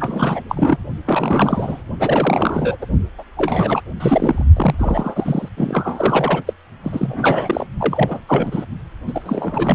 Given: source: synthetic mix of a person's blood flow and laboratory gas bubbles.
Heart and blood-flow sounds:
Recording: Doppler ultrasound of blood flow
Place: precordium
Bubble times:
0.00-0.41 s: bubbles
0.49-0.77 s: bubbles
1.05-1.82 s: bubbles
1.99-2.77 s: bubbles
2.81-2.85 s: bubbles
3.18-3.23 s: bubbles
3.36-3.81 s: bubbles
4.00-4.44 s: bubbles
4.56-4.75 s: bubbles
4.79-5.49 s: bubbles
5.57-6.42 s: bubbles
6.46-6.53 s: bubbles
6.83-7.67 s: bubbles
7.79-8.24 s: bubbles
8.27-8.65 s: bubbles
9.07-9.75 s: bubbles
From the record:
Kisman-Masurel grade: 342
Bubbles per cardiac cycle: rolling drumbeat, 9 or more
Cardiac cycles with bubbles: 100%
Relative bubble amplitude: moderate (0.250 to 0.450)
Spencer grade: 3 (all of the cardiac periods contain showers or single bubble signals, but not dominating or overriding the cardiac motion signals)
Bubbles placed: only in the low amplitude regions of the cardiac cycle

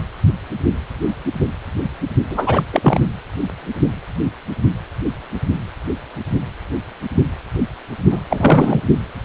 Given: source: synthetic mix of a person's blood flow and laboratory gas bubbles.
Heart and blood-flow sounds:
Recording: Doppler ultrasound of blood flow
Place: precordium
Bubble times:
2.30-2.64 s: bubbles
2.73-3.00 s: bubbles
8.12-8.20 s: bubbles
8.30-8.80 s: bubbles
From the record:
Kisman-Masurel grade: 223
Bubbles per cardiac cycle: several, 3 to 8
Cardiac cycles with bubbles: 10 to 50%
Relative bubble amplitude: loud (0.450 to 0.775)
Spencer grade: 2 (many but less than half of the cardiac periods contain bubble signals, singularly or in groups)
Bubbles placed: only in the low amplitude regions of the cardiac cycle

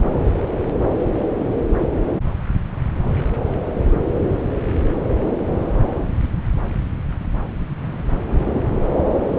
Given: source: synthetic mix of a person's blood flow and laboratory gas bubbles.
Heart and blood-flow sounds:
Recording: Doppler ultrasound of blood flow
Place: subclavian vein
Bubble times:
8.27-8.79 s: bubbles
From the record:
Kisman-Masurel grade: 211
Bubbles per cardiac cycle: several, 3 to 8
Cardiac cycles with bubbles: 1 to 10%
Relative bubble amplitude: barely perceptible (0.100 to 0.250)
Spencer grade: 1 (occasional bubble signal discernible with the cardiac motion signal, with majority of cardiac periods free of bubbles)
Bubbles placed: anywhere in the cardiac cycle

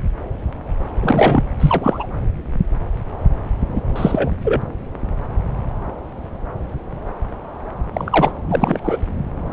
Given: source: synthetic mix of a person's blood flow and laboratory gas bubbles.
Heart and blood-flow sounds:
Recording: Doppler ultrasound of blood flow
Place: subclavian vein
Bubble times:
1.00-1.43 s: bubbles
1.60-2.06 s: bubbles
3.75-3.81 s: bubbles
3.96-4.30 s: bubbles
4.44-4.62 s: bubbles
7.93-8.32 s: bubbles
8.48-8.97 s: bubbles
From the record:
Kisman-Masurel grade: 223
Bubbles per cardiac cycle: several, 3 to 8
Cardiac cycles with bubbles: 10 to 50%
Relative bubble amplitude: loud (0.450 to 0.775)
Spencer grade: 2 (many but less than half of the cardiac periods contain bubble signals, singularly or in groups)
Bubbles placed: anywhere in the cardiac cycle

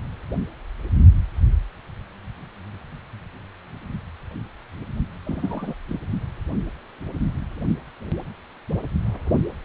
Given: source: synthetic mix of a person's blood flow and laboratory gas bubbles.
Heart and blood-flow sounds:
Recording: Doppler ultrasound of blood flow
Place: precordium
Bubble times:
5.25-5.74 s: bubbles
5.89-5.99 s: bubbles
From the record:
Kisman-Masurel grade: 211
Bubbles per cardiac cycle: several, 3 to 8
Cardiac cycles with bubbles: 1 to 10%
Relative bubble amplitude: barely perceptible (0.100 to 0.250)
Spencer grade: 1 (occasional bubble signal discernible with the cardiac motion signal, with majority of cardiac periods free of bubbles)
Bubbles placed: only in the low amplitude regions of the cardiac cycle

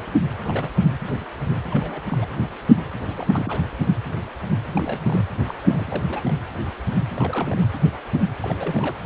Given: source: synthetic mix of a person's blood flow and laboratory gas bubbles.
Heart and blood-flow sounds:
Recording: Doppler ultrasound of blood flow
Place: precordium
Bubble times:
0.44-0.69 s: bubbles
1.71-2.01 s: bubbles
2.07-2.27 s: bubbles
3.17-3.62 s: bubbles
4.75-5.25 s: bubbles
5.45-5.54 s: bubbles
5.62-6.03 s: bubbles
6.10-6.21 s: bubbles
6.24-6.33 s: bubbles
7.14-7.68 s: bubbles
8.42-8.54 s: bubbles
8.59-8.96 s: bubbles
From the record:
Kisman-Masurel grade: 221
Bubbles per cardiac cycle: several, 3 to 8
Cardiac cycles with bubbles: 10 to 50%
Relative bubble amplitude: barely perceptible (0.100 to 0.250)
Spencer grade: 2 (many but less than half of the cardiac periods contain bubble signals, singularly or in groups)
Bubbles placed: anywhere in the cardiac cycle

